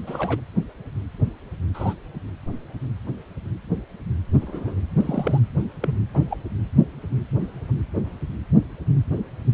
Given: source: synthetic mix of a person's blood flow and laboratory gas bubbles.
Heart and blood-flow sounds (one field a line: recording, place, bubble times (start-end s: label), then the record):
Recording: Doppler ultrasound of blood flow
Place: precordium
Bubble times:
0.07-0.41 s: bubbles
1.74-1.94 s: bubbles
4.42-4.75 s: bubbles
4.96-5.41 s: bubbles
5.82-5.96 s: bubbles
6.13-6.22 s: bubbles
6.30-6.37 s: bubbles
From the record:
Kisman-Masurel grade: 122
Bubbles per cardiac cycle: 1 to 2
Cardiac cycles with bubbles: 10 to 50%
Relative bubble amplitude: moderate (0.250 to 0.450)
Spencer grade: 2 (many but less than half of the cardiac periods contain bubble signals, singularly or in groups)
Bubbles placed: anywhere in the cardiac cycle